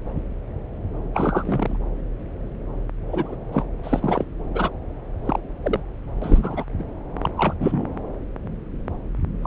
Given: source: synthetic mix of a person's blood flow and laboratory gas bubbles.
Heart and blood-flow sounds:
Doppler ultrasound of blood flow; subclavian vein
1.14-1.77 s: bubbles
3.08-3.35 s: bubbles
3.52-3.64 s: bubbles
3.83-4.25 s: bubbles
4.54-4.70 s: bubbles
5.24-5.40 s: bubbles
5.62-5.80 s: bubbles
6.21-6.65 s: bubbles
6.78-6.84 s: bubbles
7.21-7.29 s: bubbles
7.36-7.54 s: bubbles
7.60-7.83 s: bubbles
9.42-9.47 s: bubbles
From the record:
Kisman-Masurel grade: 232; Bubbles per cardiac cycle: several, 3 to 8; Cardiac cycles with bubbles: 50 to 99%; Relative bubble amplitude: moderate (0.250 to 0.450); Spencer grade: 3 (all of the cardiac periods contain showers or single bubble signals, but not dominating or overriding the cardiac motion signals); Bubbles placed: anywhere in the cardiac cycle

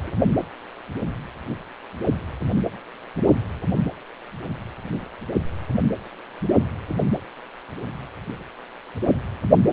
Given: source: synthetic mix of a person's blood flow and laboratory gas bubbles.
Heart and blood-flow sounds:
Doppler ultrasound of blood flow; precordium
0.04-0.12 s: bubbles
From the record:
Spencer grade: 1 (occasional bubble signal discernible with the cardiac motion signal, with majority of cardiac periods free of bubbles); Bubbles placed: anywhere in the cardiac cycle

